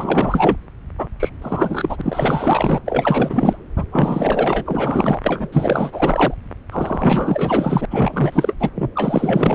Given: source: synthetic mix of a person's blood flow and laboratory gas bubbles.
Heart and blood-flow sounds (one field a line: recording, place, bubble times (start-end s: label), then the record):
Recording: Doppler ultrasound of blood flow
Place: subclavian vein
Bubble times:
0.00-0.57 s: bubbles
0.98-1.07 s: bubbles
1.20-1.29 s: bubbles
1.42-2.80 s: bubbles
2.85-3.57 s: bubbles
3.76-3.87 s: bubbles
3.92-5.20 s: bubbles
5.24-5.48 s: bubbles
5.53-6.34 s: bubbles
6.71-7.85 s: bubbles
7.90-8.56 s: bubbles
8.60-8.71 s: bubbles
8.74-8.90 s: bubbles
8.95-9.55 s: bubbles
From the record:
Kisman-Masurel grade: 444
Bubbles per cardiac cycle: continuous sound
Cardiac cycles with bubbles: 100%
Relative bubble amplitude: maximal (0.775 to 0.999)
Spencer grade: 4 (maximum detectable bubble signal sounding continuously throughout systole and diastole of every cardiac period, and overriding the amplitude of the normal cardiac signals)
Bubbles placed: anywhere in the cardiac cycle